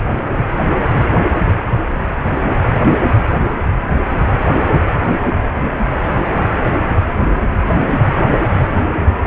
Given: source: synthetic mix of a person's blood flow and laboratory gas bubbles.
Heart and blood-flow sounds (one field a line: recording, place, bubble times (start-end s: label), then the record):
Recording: Doppler ultrasound of blood flow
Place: precordium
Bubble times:
0.34-0.41 s: bubbles
From the record:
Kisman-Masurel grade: 113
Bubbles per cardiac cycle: 1 to 2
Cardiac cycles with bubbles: 1 to 10%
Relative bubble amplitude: loud (0.450 to 0.775)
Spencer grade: 1 (occasional bubble signal discernible with the cardiac motion signal, with majority of cardiac periods free of bubbles)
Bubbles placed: anywhere in the cardiac cycle